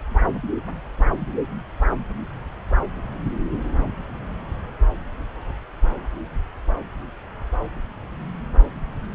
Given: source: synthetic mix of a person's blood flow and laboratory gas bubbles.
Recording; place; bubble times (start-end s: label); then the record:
Doppler ultrasound of blood flow; subclavian vein
no bubbles
From the record:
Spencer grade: 0 (complete lack of bubble signals)